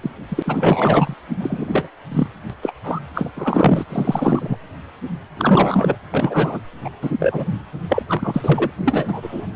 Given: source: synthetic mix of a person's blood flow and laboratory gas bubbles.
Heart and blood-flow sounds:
Doppler ultrasound of blood flow; precordium
0.02-0.11 s: bubbles
0.29-1.14 s: bubbles
1.40-1.89 s: bubbles
2.11-2.27 s: bubbles
2.49-2.54 s: bubbles
2.62-2.71 s: bubbles
2.83-2.99 s: bubbles
3.14-3.30 s: bubbles
3.35-3.85 s: bubbles
3.89-4.57 s: bubbles
5.37-5.96 s: bubbles
6.12-6.60 s: bubbles
6.84-6.90 s: bubbles
7.02-7.12 s: bubbles
7.19-7.48 s: bubbles
7.88-8.04 s: bubbles
8.07-8.71 s: bubbles
8.85-9.46 s: bubbles
From the record:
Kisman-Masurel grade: 233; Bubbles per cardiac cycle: several, 3 to 8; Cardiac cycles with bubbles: 50 to 99%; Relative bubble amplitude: loud (0.450 to 0.775); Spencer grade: 3 (all of the cardiac periods contain showers or single bubble signals, but not dominating or overriding the cardiac motion signals); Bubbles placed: anywhere in the cardiac cycle

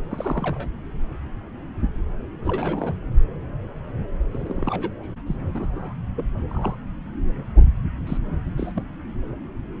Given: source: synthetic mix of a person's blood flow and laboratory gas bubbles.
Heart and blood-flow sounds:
Doppler ultrasound of blood flow; subclavian vein
0.10-0.68 s: bubbles
2.44-2.94 s: bubbles
4.31-5.06 s: bubbles
5.26-5.35 s: bubbles
5.54-5.93 s: bubbles
6.17-6.30 s: bubbles
6.48-6.76 s: bubbles
8.07-8.18 s: bubbles
8.57-8.83 s: bubbles
From the record:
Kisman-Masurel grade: 221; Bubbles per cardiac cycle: several, 3 to 8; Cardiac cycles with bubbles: 10 to 50%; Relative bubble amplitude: barely perceptible (0.100 to 0.250); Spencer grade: 2 (many but less than half of the cardiac periods contain bubble signals, singularly or in groups); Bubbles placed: anywhere in the cardiac cycle

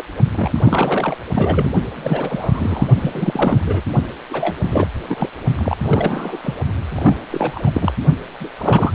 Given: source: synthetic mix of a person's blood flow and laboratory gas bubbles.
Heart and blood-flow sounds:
Doppler ultrasound of blood flow; precordium
0.00-0.03 s: bubbles
0.33-0.60 s: bubbles
0.65-1.16 s: bubbles
1.33-1.72 s: bubbles
1.93-2.87 s: bubbles
3.00-3.81 s: bubbles
4.30-4.56 s: bubbles
4.60-4.87 s: bubbles
5.08-5.29 s: bubbles
5.55-5.77 s: bubbles
5.83-6.39 s: bubbles
6.43-6.55 s: bubbles
6.89-7.17 s: bubbles
7.30-7.71 s: bubbles
7.74-7.94 s: bubbles
8.40-8.49 s: bubbles
8.57-8.92 s: bubbles
From the record:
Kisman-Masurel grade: 342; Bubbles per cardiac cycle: rolling drumbeat, 9 or more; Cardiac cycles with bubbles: 100%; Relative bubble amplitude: moderate (0.250 to 0.450); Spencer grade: 3 (all of the cardiac periods contain showers or single bubble signals, but not dominating or overriding the cardiac motion signals); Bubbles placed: only in the low amplitude regions of the cardiac cycle

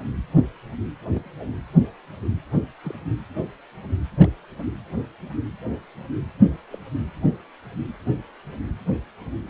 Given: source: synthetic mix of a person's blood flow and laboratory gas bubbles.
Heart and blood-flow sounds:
Doppler ultrasound of blood flow; precordium
1.11-1.31 s: bubbles
1.38-1.53 s: bubbles
2.82-2.99 s: bubbles
4.17-4.27 s: bubbles
4.58-4.66 s: bubbles
6.70-6.78 s: bubbles
From the record:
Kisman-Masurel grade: 121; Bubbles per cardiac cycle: 1 to 2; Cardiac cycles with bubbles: 10 to 50%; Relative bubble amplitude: barely perceptible (0.100 to 0.250); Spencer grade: 2 (many but less than half of the cardiac periods contain bubble signals, singularly or in groups); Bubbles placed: anywhere in the cardiac cycle

